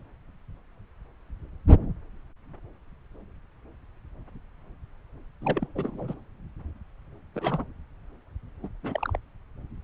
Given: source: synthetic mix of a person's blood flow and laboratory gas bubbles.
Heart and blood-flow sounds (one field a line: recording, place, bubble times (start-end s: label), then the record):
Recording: Doppler ultrasound of blood flow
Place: subclavian vein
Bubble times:
5.41-5.68 s: bubbles
5.75-6.14 s: bubbles
7.34-7.64 s: bubbles
8.63-8.69 s: bubbles
8.83-9.18 s: bubbles
From the record:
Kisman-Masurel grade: 221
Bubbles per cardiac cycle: several, 3 to 8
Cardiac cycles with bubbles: 10 to 50%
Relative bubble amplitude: barely perceptible (0.100 to 0.250)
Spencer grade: 2 (many but less than half of the cardiac periods contain bubble signals, singularly or in groups)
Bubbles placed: anywhere in the cardiac cycle